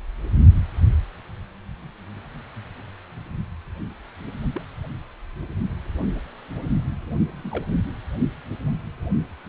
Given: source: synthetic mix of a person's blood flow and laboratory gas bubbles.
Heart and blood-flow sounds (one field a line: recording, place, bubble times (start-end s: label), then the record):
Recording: Doppler ultrasound of blood flow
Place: precordium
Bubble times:
4.54-4.62 s: bubbles
7.33-7.65 s: bubbles
From the record:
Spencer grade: 2 (many but less than half of the cardiac periods contain bubble signals, singularly or in groups)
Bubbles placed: only in the low amplitude regions of the cardiac cycle